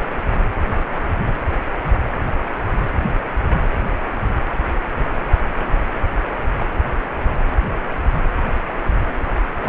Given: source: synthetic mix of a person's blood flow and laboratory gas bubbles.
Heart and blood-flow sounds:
Doppler ultrasound of blood flow; precordium
no bubbles
From the record:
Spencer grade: 0 (complete lack of bubble signals)

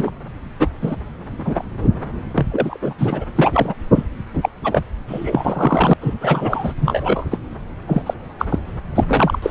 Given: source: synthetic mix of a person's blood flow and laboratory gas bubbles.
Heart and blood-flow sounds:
Doppler ultrasound of blood flow; subclavian vein
0.00-0.12 s: bubbles
0.59-0.68 s: bubbles
0.81-0.96 s: bubbles
1.39-1.65 s: bubbles
1.78-1.90 s: bubbles
2.33-2.47 s: bubbles
2.51-2.78 s: bubbles
2.81-2.94 s: bubbles
2.98-3.24 s: bubbles
3.35-3.74 s: bubbles
3.93-4.06 s: bubbles
4.33-4.50 s: bubbles
4.64-4.82 s: bubbles
5.08-5.94 s: bubbles
6.01-6.14 s: bubbles
6.21-6.73 s: bubbles
6.81-7.26 s: bubbles
7.31-7.39 s: bubbles
7.87-8.02 s: bubbles
8.06-8.14 s: bubbles
8.38-8.46 s: bubbles
8.49-8.59 s: bubbles
8.96-9.04 s: bubbles
9.08-9.38 s: bubbles
9.42-9.51 s: bubbles
From the record:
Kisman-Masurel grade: 243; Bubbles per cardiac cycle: several, 3 to 8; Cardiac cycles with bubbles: 100%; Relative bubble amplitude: loud (0.450 to 0.775); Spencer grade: 3 (all of the cardiac periods contain showers or single bubble signals, but not dominating or overriding the cardiac motion signals); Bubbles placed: anywhere in the cardiac cycle

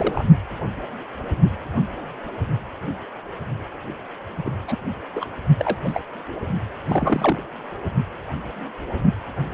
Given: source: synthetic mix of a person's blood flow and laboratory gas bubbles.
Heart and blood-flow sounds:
Doppler ultrasound of blood flow; precordium
0.00-0.25 s: bubbles
4.45-4.56 s: bubbles
4.68-4.77 s: bubbles
5.16-5.26 s: bubbles
5.59-5.77 s: bubbles
5.84-6.03 s: bubbles
6.88-7.43 s: bubbles
From the record:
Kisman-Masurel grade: 222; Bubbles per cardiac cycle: several, 3 to 8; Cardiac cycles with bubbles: 10 to 50%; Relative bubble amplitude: moderate (0.250 to 0.450); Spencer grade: 2 (many but less than half of the cardiac periods contain bubble signals, singularly or in groups); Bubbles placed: only in the low amplitude regions of the cardiac cycle

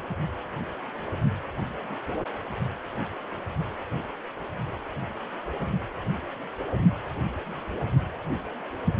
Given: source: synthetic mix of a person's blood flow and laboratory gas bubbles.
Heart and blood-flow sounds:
Doppler ultrasound of blood flow; precordium
no bubbles
From the record:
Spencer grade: 0 (complete lack of bubble signals)

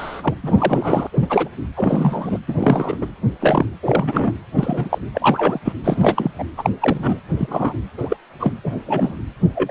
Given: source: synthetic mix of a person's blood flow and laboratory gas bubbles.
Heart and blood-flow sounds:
Doppler ultrasound of blood flow; precordium
0.00-0.34 s: bubbles
0.43-1.07 s: bubbles
1.12-1.26 s: bubbles
1.29-1.49 s: bubbles
1.76-2.38 s: bubbles
2.48-2.55 s: bubbles
2.58-2.96 s: bubbles
3.00-3.06 s: bubbles
3.40-3.66 s: bubbles
3.82-4.32 s: bubbles
4.55-4.98 s: bubbles
5.14-5.59 s: bubbles
5.64-5.72 s: bubbles
5.84-6.31 s: bubbles
6.38-6.44 s: bubbles
6.57-6.70 s: bubbles
6.80-7.19 s: bubbles
7.31-7.74 s: bubbles
7.97-8.17 s: bubbles
8.39-8.53 s: bubbles
8.63-8.72 s: bubbles
8.86-9.14 s: bubbles
9.54-9.71 s: bubbles
From the record:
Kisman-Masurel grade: 243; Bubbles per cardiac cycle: several, 3 to 8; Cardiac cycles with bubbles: 100%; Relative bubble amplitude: loud (0.450 to 0.775); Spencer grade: 3 (all of the cardiac periods contain showers or single bubble signals, but not dominating or overriding the cardiac motion signals); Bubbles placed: anywhere in the cardiac cycle

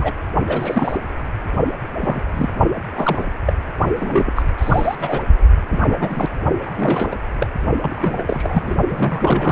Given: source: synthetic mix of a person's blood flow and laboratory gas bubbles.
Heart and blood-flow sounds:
Doppler ultrasound of blood flow; precordium
0.00-0.12 s: bubbles
0.48-0.97 s: bubbles
1.98-2.21 s: bubbles
2.33-2.50 s: bubbles
2.94-3.25 s: bubbles
3.46-3.53 s: bubbles
3.95-4.33 s: bubbles
4.35-4.43 s: bubbles
4.58-4.96 s: bubbles
4.99-5.25 s: bubbles
5.70-5.79 s: bubbles
5.88-6.29 s: bubbles
6.62-7.15 s: bubbles
7.39-7.47 s: bubbles
7.81-8.24 s: bubbles
8.27-8.75 s: bubbles
8.91-9.51 s: bubbles
From the record:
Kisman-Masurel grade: 243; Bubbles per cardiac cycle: several, 3 to 8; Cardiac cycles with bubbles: 100%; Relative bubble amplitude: loud (0.450 to 0.775); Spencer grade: 3 (all of the cardiac periods contain showers or single bubble signals, but not dominating or overriding the cardiac motion signals); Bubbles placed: only in the low amplitude regions of the cardiac cycle

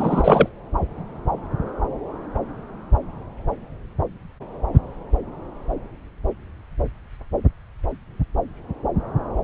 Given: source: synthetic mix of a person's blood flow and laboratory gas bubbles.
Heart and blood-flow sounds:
Doppler ultrasound of blood flow; subclavian vein
0.00-0.49 s: bubbles
From the record:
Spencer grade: 1 (occasional bubble signal discernible with the cardiac motion signal, with majority of cardiac periods free of bubbles); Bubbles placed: anywhere in the cardiac cycle

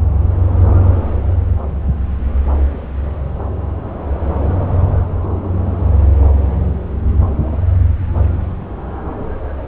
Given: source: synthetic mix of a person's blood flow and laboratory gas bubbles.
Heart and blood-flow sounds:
Doppler ultrasound of blood flow; subclavian vein
no bubbles
From the record:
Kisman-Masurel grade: 000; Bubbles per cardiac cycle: 0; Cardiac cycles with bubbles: 0%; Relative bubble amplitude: no bubbles discernible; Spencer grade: 0 (complete lack of bubble signals)

